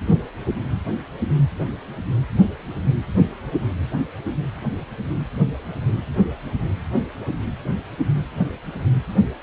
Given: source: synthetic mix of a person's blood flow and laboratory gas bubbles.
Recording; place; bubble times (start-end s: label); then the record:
Doppler ultrasound of blood flow; precordium
no bubbles
From the record:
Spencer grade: 0 (complete lack of bubble signals)